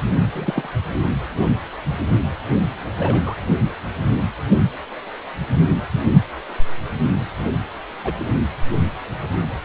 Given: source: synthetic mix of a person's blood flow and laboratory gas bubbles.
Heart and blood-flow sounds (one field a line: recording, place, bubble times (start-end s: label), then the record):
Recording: Doppler ultrasound of blood flow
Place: precordium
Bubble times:
0.32-0.69 s: bubbles
3.00-3.21 s: bubbles
3.25-3.36 s: bubbles
8.04-8.13 s: bubbles
From the record:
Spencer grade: 2 (many but less than half of the cardiac periods contain bubble signals, singularly or in groups)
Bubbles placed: only in the low amplitude regions of the cardiac cycle